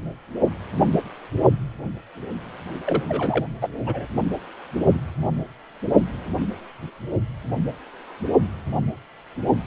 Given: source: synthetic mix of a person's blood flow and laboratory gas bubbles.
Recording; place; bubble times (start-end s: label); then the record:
Doppler ultrasound of blood flow; precordium
2.85-3.04 s: bubbles
3.08-3.47 s: bubbles
3.61-3.69 s: bubbles
3.86-4.07 s: bubbles
From the record:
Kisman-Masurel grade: 212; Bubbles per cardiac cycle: several, 3 to 8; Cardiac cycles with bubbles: 1 to 10%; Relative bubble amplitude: moderate (0.250 to 0.450); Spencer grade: 1 (occasional bubble signal discernible with the cardiac motion signal, with majority of cardiac periods free of bubbles); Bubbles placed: only in the low amplitude regions of the cardiac cycle